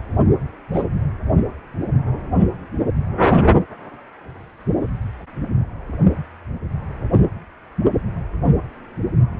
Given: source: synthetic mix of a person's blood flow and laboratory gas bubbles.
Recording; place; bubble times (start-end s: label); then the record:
Doppler ultrasound of blood flow; precordium
0.74-0.83 s: bubbles
From the record:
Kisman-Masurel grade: 112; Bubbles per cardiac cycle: 1 to 2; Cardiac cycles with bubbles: 1 to 10%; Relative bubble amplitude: moderate (0.250 to 0.450); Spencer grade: 1 (occasional bubble signal discernible with the cardiac motion signal, with majority of cardiac periods free of bubbles); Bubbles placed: only in the low amplitude regions of the cardiac cycle